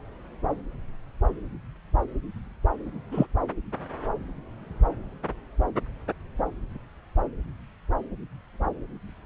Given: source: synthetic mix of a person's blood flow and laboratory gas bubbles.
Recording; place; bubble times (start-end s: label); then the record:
Doppler ultrasound of blood flow; subclavian vein
3.11-3.27 s: bubbles
From the record:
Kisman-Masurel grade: 112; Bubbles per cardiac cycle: 1 to 2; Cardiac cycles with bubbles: 1 to 10%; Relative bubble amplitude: moderate (0.250 to 0.450); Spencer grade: 1 (occasional bubble signal discernible with the cardiac motion signal, with majority of cardiac periods free of bubbles); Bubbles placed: anywhere in the cardiac cycle